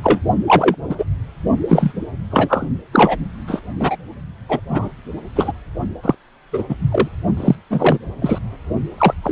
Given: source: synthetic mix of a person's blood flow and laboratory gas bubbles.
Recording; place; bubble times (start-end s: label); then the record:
Doppler ultrasound of blood flow; precordium
0.03-0.19 s: bubbles
0.47-0.76 s: bubbles
0.90-1.04 s: bubbles
1.68-1.92 s: bubbles
2.30-2.67 s: bubbles
2.92-3.17 s: bubbles
3.47-3.62 s: bubbles
3.79-3.96 s: bubbles
4.48-4.60 s: bubbles
4.69-4.88 s: bubbles
5.35-5.52 s: bubbles
6.02-6.15 s: bubbles
6.52-6.64 s: bubbles
6.68-6.75 s: bubbles
6.91-7.08 s: bubbles
7.37-7.55 s: bubbles
7.69-7.98 s: bubbles
8.21-8.38 s: bubbles
8.98-9.14 s: bubbles
9.22-9.32 s: bubbles
From the record:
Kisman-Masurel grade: 243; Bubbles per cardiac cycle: several, 3 to 8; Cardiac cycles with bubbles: 100%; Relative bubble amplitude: loud (0.450 to 0.775); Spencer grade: 3 (all of the cardiac periods contain showers or single bubble signals, but not dominating or overriding the cardiac motion signals); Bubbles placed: only in the low amplitude regions of the cardiac cycle